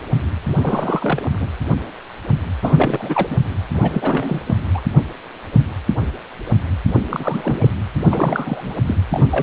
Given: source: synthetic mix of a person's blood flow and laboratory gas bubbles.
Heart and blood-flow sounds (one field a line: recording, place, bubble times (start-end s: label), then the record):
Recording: Doppler ultrasound of blood flow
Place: precordium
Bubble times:
0.47-0.54 s: bubbles
0.61-1.46 s: bubbles
2.62-3.38 s: bubbles
3.73-4.42 s: bubbles
4.46-4.61 s: bubbles
4.74-4.80 s: bubbles
6.93-7.00 s: bubbles
7.08-7.71 s: bubbles
8.01-8.75 s: bubbles
8.87-8.96 s: bubbles
9.11-9.24 s: bubbles
9.31-9.43 s: bubbles
From the record:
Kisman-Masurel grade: 332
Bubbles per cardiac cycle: rolling drumbeat, 9 or more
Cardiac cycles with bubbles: 50 to 99%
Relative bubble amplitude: moderate (0.250 to 0.450)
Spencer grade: 3 (all of the cardiac periods contain showers or single bubble signals, but not dominating or overriding the cardiac motion signals)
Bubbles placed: anywhere in the cardiac cycle